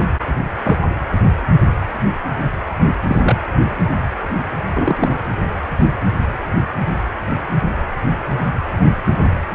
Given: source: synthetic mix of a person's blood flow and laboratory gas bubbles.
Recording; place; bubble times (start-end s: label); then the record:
Doppler ultrasound of blood flow; precordium
0.00-0.07 s: bubbles
0.65-0.78 s: bubbles
3.07-3.17 s: bubbles
3.23-3.36 s: bubbles
4.73-5.09 s: bubbles
From the record:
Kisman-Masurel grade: 123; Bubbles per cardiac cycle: 1 to 2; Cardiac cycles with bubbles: 10 to 50%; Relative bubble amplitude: loud (0.450 to 0.775); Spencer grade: 2 (many but less than half of the cardiac periods contain bubble signals, singularly or in groups); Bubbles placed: anywhere in the cardiac cycle